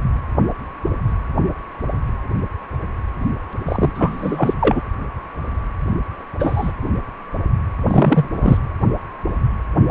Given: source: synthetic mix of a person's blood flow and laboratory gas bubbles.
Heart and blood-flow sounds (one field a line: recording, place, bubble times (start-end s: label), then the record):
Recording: Doppler ultrasound of blood flow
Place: precordium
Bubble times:
3.66-3.92 s: bubbles
3.94-4.54 s: bubbles
4.60-4.82 s: bubbles
6.39-6.72 s: bubbles
7.87-8.25 s: bubbles
8.32-8.57 s: bubbles
From the record:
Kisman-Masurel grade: 223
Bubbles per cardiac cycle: several, 3 to 8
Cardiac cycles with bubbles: 10 to 50%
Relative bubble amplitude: loud (0.450 to 0.775)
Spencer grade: 2 (many but less than half of the cardiac periods contain bubble signals, singularly or in groups)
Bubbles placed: anywhere in the cardiac cycle